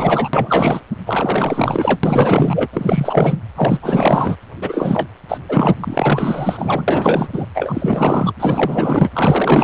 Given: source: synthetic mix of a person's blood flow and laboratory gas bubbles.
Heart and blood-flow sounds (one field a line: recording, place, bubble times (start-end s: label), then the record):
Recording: Doppler ultrasound of blood flow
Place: precordium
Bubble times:
0.00-0.29 s: bubbles
0.33-0.81 s: bubbles
1.06-2.00 s: bubbles
2.03-2.67 s: bubbles
2.73-3.38 s: bubbles
3.56-3.79 s: bubbles
3.83-4.36 s: bubbles
4.61-5.08 s: bubbles
5.29-5.38 s: bubbles
5.49-5.75 s: bubbles
5.80-7.29 s: bubbles
7.33-7.47 s: bubbles
7.54-8.34 s: bubbles
8.39-9.10 s: bubbles
9.13-9.64 s: bubbles
From the record:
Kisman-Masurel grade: 444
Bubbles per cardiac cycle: continuous sound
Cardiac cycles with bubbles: 100%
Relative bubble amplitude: maximal (0.775 to 0.999)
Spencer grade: 4 (maximum detectable bubble signal sounding continuously throughout systole and diastole of every cardiac period, and overriding the amplitude of the normal cardiac signals)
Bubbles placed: anywhere in the cardiac cycle